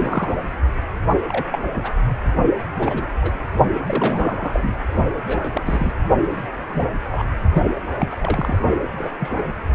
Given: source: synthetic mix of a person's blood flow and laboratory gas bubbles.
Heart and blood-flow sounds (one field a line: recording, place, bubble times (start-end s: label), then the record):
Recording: Doppler ultrasound of blood flow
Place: precordium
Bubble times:
0.00-0.35 s: bubbles
1.28-1.58 s: bubbles
1.73-1.92 s: bubbles
2.78-3.06 s: bubbles
3.22-3.33 s: bubbles
3.86-4.76 s: bubbles
5.27-5.50 s: bubbles
5.53-5.93 s: bubbles
6.29-6.42 s: bubbles
6.69-6.83 s: bubbles
7.04-7.24 s: bubbles
7.53-7.62 s: bubbles
7.99-8.18 s: bubbles
8.21-8.59 s: bubbles
8.81-9.10 s: bubbles
9.19-9.31 s: bubbles
From the record:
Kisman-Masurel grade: 232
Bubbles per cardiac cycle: several, 3 to 8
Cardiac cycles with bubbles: 50 to 99%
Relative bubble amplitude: moderate (0.250 to 0.450)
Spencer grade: 3 (all of the cardiac periods contain showers or single bubble signals, but not dominating or overriding the cardiac motion signals)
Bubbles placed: only in the low amplitude regions of the cardiac cycle